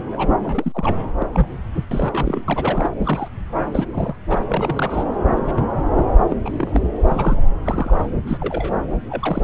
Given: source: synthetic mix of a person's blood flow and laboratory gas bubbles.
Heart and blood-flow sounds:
Doppler ultrasound of blood flow; subclavian vein
0.00-0.03 s: bubbles
0.12-0.28 s: bubbles
0.43-0.97 s: bubbles
1.19-1.27 s: bubbles
1.32-1.48 s: bubbles
1.73-1.85 s: bubbles
1.91-2.41 s: bubbles
2.48-2.91 s: bubbles
2.98-3.28 s: bubbles
3.73-3.87 s: bubbles
3.93-4.15 s: bubbles
4.29-5.06 s: bubbles
5.47-5.53 s: bubbles
5.56-5.62 s: bubbles
5.89-6.14 s: bubbles
6.28-6.36 s: bubbles
6.45-6.80 s: bubbles
7.07-7.37 s: bubbles
7.64-8.09 s: bubbles
8.27-8.38 s: bubbles
8.40-8.73 s: bubbles
9.10-9.44 s: bubbles
From the record:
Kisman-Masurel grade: 242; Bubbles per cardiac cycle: several, 3 to 8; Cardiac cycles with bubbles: 100%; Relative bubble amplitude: moderate (0.250 to 0.450); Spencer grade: 3 (all of the cardiac periods contain showers or single bubble signals, but not dominating or overriding the cardiac motion signals); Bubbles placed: anywhere in the cardiac cycle

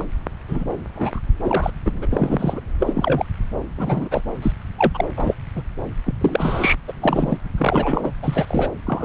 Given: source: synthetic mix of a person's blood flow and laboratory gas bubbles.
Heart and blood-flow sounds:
Doppler ultrasound of blood flow; subclavian vein
0.00-0.03 s: bubbles
0.48-0.65 s: bubbles
0.96-1.20 s: bubbles
1.44-1.71 s: bubbles
1.85-1.92 s: bubbles
2.02-2.06 s: bubbles
2.12-2.60 s: bubbles
2.79-3.25 s: bubbles
3.77-4.08 s: bubbles
4.11-4.21 s: bubbles
4.42-4.53 s: bubbles
4.78-5.04 s: bubbles
5.17-5.35 s: bubbles
5.55-5.62 s: bubbles
6.06-6.13 s: bubbles
6.21-6.75 s: bubbles
6.88-6.92 s: bubbles
7.01-7.37 s: bubbles
7.58-8.12 s: bubbles
8.22-8.68 s: bubbles
8.86-9.05 s: bubbles
From the record:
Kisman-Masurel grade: 242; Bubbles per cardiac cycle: several, 3 to 8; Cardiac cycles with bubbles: 100%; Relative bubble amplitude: moderate (0.250 to 0.450); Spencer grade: 3 (all of the cardiac periods contain showers or single bubble signals, but not dominating or overriding the cardiac motion signals); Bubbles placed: anywhere in the cardiac cycle

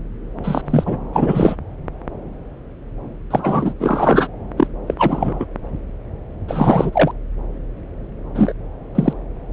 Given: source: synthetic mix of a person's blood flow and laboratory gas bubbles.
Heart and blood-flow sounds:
Doppler ultrasound of blood flow; subclavian vein
0.43-0.61 s: bubbles
0.66-0.97 s: bubbles
1.13-1.56 s: bubbles
3.30-3.74 s: bubbles
3.80-4.28 s: bubbles
4.57-4.67 s: bubbles
4.87-4.94 s: bubbles
4.99-5.46 s: bubbles
6.48-7.12 s: bubbles
8.35-8.54 s: bubbles
8.95-9.13 s: bubbles
From the record:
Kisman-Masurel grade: 233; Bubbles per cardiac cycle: several, 3 to 8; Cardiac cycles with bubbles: 50 to 99%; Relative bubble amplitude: loud (0.450 to 0.775); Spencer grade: 3 (all of the cardiac periods contain showers or single bubble signals, but not dominating or overriding the cardiac motion signals); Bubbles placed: anywhere in the cardiac cycle

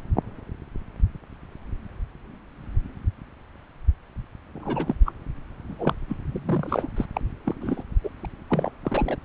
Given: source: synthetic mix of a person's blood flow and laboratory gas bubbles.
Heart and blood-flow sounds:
Doppler ultrasound of blood flow; subclavian vein
4.54-4.95 s: bubbles
5.05-5.12 s: bubbles
5.67-5.95 s: bubbles
6.08-6.17 s: bubbles
6.29-6.88 s: bubbles
6.96-7.05 s: bubbles
7.14-7.21 s: bubbles
7.45-7.55 s: bubbles
7.61-7.83 s: bubbles
8.04-8.10 s: bubbles
8.24-8.26 s: bubbles
8.49-8.72 s: bubbles
8.84-9.17 s: bubbles
From the record:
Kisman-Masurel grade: 232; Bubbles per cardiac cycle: several, 3 to 8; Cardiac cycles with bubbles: 50 to 99%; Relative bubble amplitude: moderate (0.250 to 0.450); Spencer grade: 3 (all of the cardiac periods contain showers or single bubble signals, but not dominating or overriding the cardiac motion signals); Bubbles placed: anywhere in the cardiac cycle

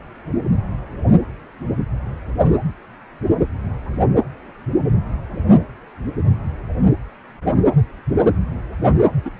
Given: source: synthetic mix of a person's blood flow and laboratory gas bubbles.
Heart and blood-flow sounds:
Doppler ultrasound of blood flow; precordium
9.25-9.30 s: bubbles
From the record:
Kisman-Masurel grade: 112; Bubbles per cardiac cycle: 1 to 2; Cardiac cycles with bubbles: 1 to 10%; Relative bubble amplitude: moderate (0.250 to 0.450); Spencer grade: 1 (occasional bubble signal discernible with the cardiac motion signal, with majority of cardiac periods free of bubbles); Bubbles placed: anywhere in the cardiac cycle

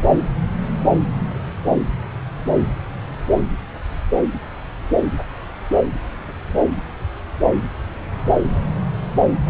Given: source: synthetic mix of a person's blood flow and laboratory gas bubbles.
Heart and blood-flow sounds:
Doppler ultrasound of blood flow; subclavian vein
no bubbles
From the record:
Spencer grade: 0 (complete lack of bubble signals)

